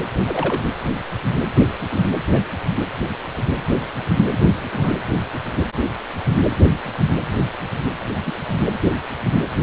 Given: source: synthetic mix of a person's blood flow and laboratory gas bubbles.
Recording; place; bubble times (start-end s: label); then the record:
Doppler ultrasound of blood flow; precordium
0.25-0.63 s: bubbles
1.92-2.05 s: bubbles
2.32-2.41 s: bubbles
4.72-4.96 s: bubbles
8.25-8.33 s: bubbles
From the record:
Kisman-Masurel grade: 122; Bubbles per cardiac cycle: 1 to 2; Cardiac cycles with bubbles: 10 to 50%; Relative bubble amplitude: moderate (0.250 to 0.450); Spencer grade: 2 (many but less than half of the cardiac periods contain bubble signals, singularly or in groups); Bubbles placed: anywhere in the cardiac cycle